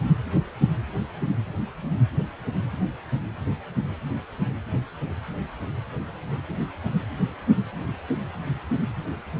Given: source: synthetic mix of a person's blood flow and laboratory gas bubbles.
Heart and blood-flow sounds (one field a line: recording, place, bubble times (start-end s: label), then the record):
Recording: Doppler ultrasound of blood flow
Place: precordium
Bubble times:
no bubbles
From the record:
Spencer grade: 0 (complete lack of bubble signals)